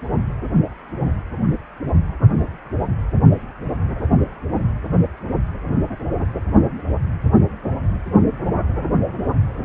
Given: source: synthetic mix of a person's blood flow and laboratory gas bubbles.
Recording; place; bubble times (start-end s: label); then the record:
Doppler ultrasound of blood flow; precordium
no bubbles
From the record:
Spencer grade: 0 (complete lack of bubble signals)